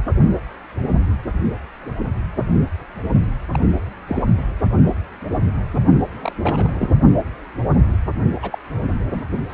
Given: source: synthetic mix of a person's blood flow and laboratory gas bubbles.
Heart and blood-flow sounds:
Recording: Doppler ultrasound of blood flow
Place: precordium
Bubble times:
3.54-3.59 s: bubbles
4.07-4.24 s: bubbles
4.37-4.43 s: bubbles
6.16-6.92 s: bubbles
8.42-8.59 s: bubbles
9.13-9.21 s: bubbles
9.50-9.54 s: bubbles
From the record:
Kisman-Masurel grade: 222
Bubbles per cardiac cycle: several, 3 to 8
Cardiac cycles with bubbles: 10 to 50%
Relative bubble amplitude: moderate (0.250 to 0.450)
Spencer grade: 2 (many but less than half of the cardiac periods contain bubble signals, singularly or in groups)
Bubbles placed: only in the low amplitude regions of the cardiac cycle

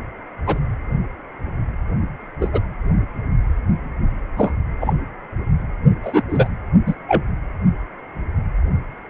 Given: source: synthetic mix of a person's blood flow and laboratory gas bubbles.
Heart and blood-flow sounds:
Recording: Doppler ultrasound of blood flow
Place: precordium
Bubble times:
0.46-0.58 s: bubbles
2.41-2.49 s: bubbles
2.53-2.60 s: bubbles
4.38-4.52 s: bubbles
4.80-4.94 s: bubbles
6.03-6.22 s: bubbles
6.29-6.48 s: bubbles
6.86-6.94 s: bubbles
7.08-7.23 s: bubbles
From the record:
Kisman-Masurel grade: 123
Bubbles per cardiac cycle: 1 to 2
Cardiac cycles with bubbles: 10 to 50%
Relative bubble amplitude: loud (0.450 to 0.775)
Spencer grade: 2 (many but less than half of the cardiac periods contain bubble signals, singularly or in groups)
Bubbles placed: anywhere in the cardiac cycle

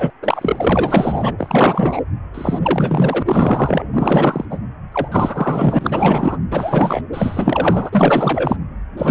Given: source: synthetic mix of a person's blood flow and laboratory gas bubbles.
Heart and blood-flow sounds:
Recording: Doppler ultrasound of blood flow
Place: precordium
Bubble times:
0.00-0.10 s: bubbles
0.22-1.33 s: bubbles
1.38-2.01 s: bubbles
2.34-2.59 s: bubbles
2.62-3.22 s: bubbles
3.25-3.84 s: bubbles
3.93-4.45 s: bubbles
4.50-4.58 s: bubbles
4.92-5.08 s: bubbles
5.12-6.38 s: bubbles
6.51-7.01 s: bubbles
7.12-8.56 s: bubbles
8.97-9.10 s: bubbles
From the record:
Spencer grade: 4 (maximum detectable bubble signal sounding continuously throughout systole and diastole of every cardiac period, and overriding the amplitude of the normal cardiac signals)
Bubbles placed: anywhere in the cardiac cycle

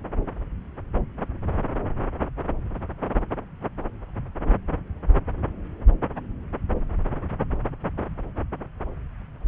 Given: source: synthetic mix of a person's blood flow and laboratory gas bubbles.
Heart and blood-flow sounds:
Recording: Doppler ultrasound of blood flow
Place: subclavian vein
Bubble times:
no bubbles
From the record:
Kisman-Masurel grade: 000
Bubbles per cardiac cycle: 0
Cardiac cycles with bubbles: 0%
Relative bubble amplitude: no bubbles discernible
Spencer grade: 0 (complete lack of bubble signals)

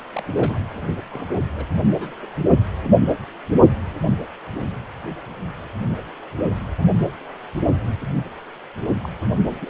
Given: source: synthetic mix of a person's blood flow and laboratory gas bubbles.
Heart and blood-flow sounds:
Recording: Doppler ultrasound of blood flow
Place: precordium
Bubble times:
0.14-0.22 s: bubbles
0.36-0.59 s: bubbles
0.75-0.80 s: bubbles
1.12-1.39 s: bubbles
1.55-1.65 s: bubbles
1.88-2.27 s: bubbles
9.02-9.09 s: bubbles
9.46-9.59 s: bubbles
9.61-9.70 s: bubbles
From the record:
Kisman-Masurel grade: 221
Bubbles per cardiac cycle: several, 3 to 8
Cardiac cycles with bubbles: 10 to 50%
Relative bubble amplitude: barely perceptible (0.100 to 0.250)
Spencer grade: 2 (many but less than half of the cardiac periods contain bubble signals, singularly or in groups)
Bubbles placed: only in the low amplitude regions of the cardiac cycle

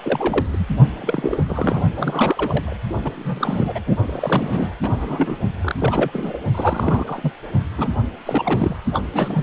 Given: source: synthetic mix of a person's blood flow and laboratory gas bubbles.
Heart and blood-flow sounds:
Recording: Doppler ultrasound of blood flow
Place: precordium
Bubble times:
0.02-0.65 s: bubbles
1.01-1.44 s: bubbles
1.48-1.82 s: bubbles
1.97-2.77 s: bubbles
3.04-3.11 s: bubbles
3.15-3.81 s: bubbles
3.86-3.96 s: bubbles
4.06-4.72 s: bubbles
4.83-5.36 s: bubbles
5.61-5.75 s: bubbles
5.79-6.38 s: bubbles
6.54-7.31 s: bubbles
7.78-7.91 s: bubbles
8.25-8.76 s: bubbles
8.94-9.03 s: bubbles
9.13-9.43 s: bubbles
From the record:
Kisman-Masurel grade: 342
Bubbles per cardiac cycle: rolling drumbeat, 9 or more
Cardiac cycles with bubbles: 100%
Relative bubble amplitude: moderate (0.250 to 0.450)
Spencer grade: 3 (all of the cardiac periods contain showers or single bubble signals, but not dominating or overriding the cardiac motion signals)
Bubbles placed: only in the low amplitude regions of the cardiac cycle

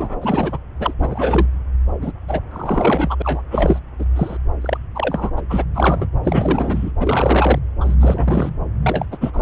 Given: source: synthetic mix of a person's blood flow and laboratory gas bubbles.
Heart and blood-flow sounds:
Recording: Doppler ultrasound of blood flow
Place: subclavian vein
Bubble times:
0.00-0.18 s: bubbles
0.22-0.58 s: bubbles
0.80-0.94 s: bubbles
0.99-1.46 s: bubbles
2.01-2.12 s: bubbles
2.28-2.40 s: bubbles
2.51-3.15 s: bubbles
3.19-3.22 s: bubbles
3.24-3.42 s: bubbles
3.50-3.79 s: bubbles
3.99-4.05 s: bubbles
4.16-4.37 s: bubbles
4.61-4.77 s: bubbles
4.95-5.30 s: bubbles
5.37-5.41 s: bubbles
5.49-5.64 s: bubbles
5.75-6.06 s: bubbles
6.23-6.92 s: bubbles
7.00-7.58 s: bubbles
7.80-7.95 s: bubbles
8.00-8.52 s: bubbles
8.83-9.05 s: bubbles
9.12-9.17 s: bubbles
9.21-9.42 s: bubbles
From the record:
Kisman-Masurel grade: 342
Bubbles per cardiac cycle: rolling drumbeat, 9 or more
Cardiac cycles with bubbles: 100%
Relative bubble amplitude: moderate (0.250 to 0.450)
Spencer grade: 3 (all of the cardiac periods contain showers or single bubble signals, but not dominating or overriding the cardiac motion signals)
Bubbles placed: anywhere in the cardiac cycle

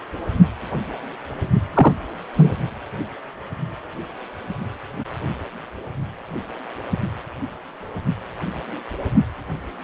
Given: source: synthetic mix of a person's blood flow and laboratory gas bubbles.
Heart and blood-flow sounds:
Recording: Doppler ultrasound of blood flow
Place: precordium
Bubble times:
1.74-1.93 s: bubbles
2.37-2.55 s: bubbles
From the record:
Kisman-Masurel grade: 113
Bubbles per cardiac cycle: 1 to 2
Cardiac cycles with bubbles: 1 to 10%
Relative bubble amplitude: loud (0.450 to 0.775)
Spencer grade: 1 (occasional bubble signal discernible with the cardiac motion signal, with majority of cardiac periods free of bubbles)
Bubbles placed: only in the low amplitude regions of the cardiac cycle

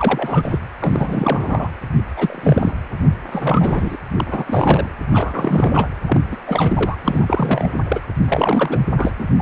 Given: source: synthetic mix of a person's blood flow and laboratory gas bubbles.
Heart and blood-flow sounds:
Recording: Doppler ultrasound of blood flow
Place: precordium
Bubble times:
0.00-0.58 s: bubbles
0.80-1.69 s: bubbles
2.17-2.73 s: bubbles
3.30-3.97 s: bubbles
4.16-4.89 s: bubbles
5.10-5.88 s: bubbles
6.07-6.24 s: bubbles
6.31-6.37 s: bubbles
6.46-6.96 s: bubbles
7.04-7.82 s: bubbles
7.88-8.00 s: bubbles
8.28-8.79 s: bubbles
8.96-9.14 s: bubbles
9.19-9.26 s: bubbles
9.38-9.41 s: bubbles
From the record:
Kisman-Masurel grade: 343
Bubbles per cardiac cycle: rolling drumbeat, 9 or more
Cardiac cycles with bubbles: 100%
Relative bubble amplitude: loud (0.450 to 0.775)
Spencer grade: 3 (all of the cardiac periods contain showers or single bubble signals, but not dominating or overriding the cardiac motion signals)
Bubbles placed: anywhere in the cardiac cycle

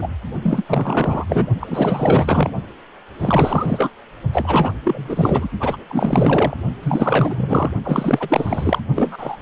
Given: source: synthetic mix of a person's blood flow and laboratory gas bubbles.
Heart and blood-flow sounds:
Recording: Doppler ultrasound of blood flow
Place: precordium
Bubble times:
0.00-0.08 s: bubbles
0.43-1.25 s: bubbles
1.28-1.46 s: bubbles
1.60-2.50 s: bubbles
3.19-3.90 s: bubbles
4.32-4.74 s: bubbles
4.83-5.49 s: bubbles
5.59-5.77 s: bubbles
5.88-6.55 s: bubbles
6.83-7.71 s: bubbles
7.83-8.81 s: bubbles
8.95-9.36 s: bubbles
From the record:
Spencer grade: 4 (maximum detectable bubble signal sounding continuously throughout systole and diastole of every cardiac period, and overriding the amplitude of the normal cardiac signals)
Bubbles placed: only in the low amplitude regions of the cardiac cycle

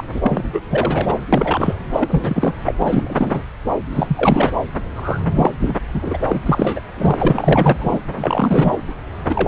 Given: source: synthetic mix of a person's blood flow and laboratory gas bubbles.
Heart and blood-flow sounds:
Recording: Doppler ultrasound of blood flow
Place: subclavian vein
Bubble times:
0.00-0.04 s: bubbles
0.15-0.20 s: bubbles
0.23-0.43 s: bubbles
0.53-0.61 s: bubbles
0.69-1.19 s: bubbles
1.33-1.75 s: bubbles
1.93-2.54 s: bubbles
2.65-2.75 s: bubbles
2.81-3.42 s: bubbles
3.92-4.51 s: bubbles
4.96-5.20 s: bubbles
5.35-5.54 s: bubbles
5.60-5.76 s: bubbles
5.94-6.18 s: bubbles
6.24-6.26 s: bubbles
6.29-6.40 s: bubbles
6.46-6.79 s: bubbles
6.97-7.16 s: bubbles
7.19-7.77 s: bubbles
7.79-7.99 s: bubbles
8.16-8.79 s: bubbles
9.29-9.48 s: bubbles
From the record:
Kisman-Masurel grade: 343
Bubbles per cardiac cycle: rolling drumbeat, 9 or more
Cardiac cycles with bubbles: 100%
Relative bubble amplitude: loud (0.450 to 0.775)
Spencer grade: 3 (all of the cardiac periods contain showers or single bubble signals, but not dominating or overriding the cardiac motion signals)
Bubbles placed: anywhere in the cardiac cycle

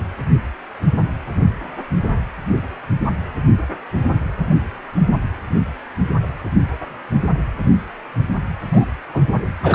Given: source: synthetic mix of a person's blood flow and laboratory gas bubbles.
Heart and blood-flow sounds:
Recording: Doppler ultrasound of blood flow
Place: precordium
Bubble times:
8.72-8.85 s: bubbles
9.13-9.22 s: bubbles
9.62-9.75 s: bubbles
From the record:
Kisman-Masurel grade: 122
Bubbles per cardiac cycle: 1 to 2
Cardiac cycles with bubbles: 10 to 50%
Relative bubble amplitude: moderate (0.250 to 0.450)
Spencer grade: 2 (many but less than half of the cardiac periods contain bubble signals, singularly or in groups)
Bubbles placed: anywhere in the cardiac cycle

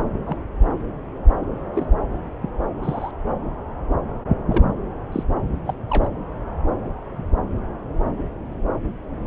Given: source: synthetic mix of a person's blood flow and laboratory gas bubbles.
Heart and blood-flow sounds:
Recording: Doppler ultrasound of blood flow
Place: subclavian vein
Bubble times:
0.26-0.36 s: bubbles
1.74-1.86 s: bubbles
2.42-2.50 s: bubbles
2.83-3.11 s: bubbles
4.49-4.64 s: bubbles
5.12-5.23 s: bubbles
5.65-5.74 s: bubbles
5.88-6.08 s: bubbles
From the record:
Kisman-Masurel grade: 121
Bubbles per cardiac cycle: 1 to 2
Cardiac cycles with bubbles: 10 to 50%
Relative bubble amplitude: barely perceptible (0.100 to 0.250)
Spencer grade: 2 (many but less than half of the cardiac periods contain bubble signals, singularly or in groups)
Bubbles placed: anywhere in the cardiac cycle

